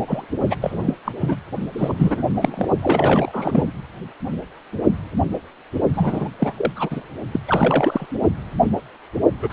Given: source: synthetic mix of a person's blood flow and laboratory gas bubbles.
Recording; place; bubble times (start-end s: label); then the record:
Doppler ultrasound of blood flow; precordium
0.08-0.26 s: bubbles
0.43-0.55 s: bubbles
0.61-0.96 s: bubbles
1.05-1.12 s: bubbles
1.19-1.40 s: bubbles
1.73-2.22 s: bubbles
2.42-2.67 s: bubbles
2.82-3.64 s: bubbles
5.94-6.29 s: bubbles
6.39-6.53 s: bubbles
6.57-6.72 s: bubbles
6.75-7.01 s: bubbles
7.32-7.40 s: bubbles
7.47-8.06 s: bubbles
9.42-9.53 s: bubbles
From the record:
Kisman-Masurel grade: 333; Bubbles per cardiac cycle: rolling drumbeat, 9 or more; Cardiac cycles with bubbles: 50 to 99%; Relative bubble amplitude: loud (0.450 to 0.775); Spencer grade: 3 (all of the cardiac periods contain showers or single bubble signals, but not dominating or overriding the cardiac motion signals); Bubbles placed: only in the low amplitude regions of the cardiac cycle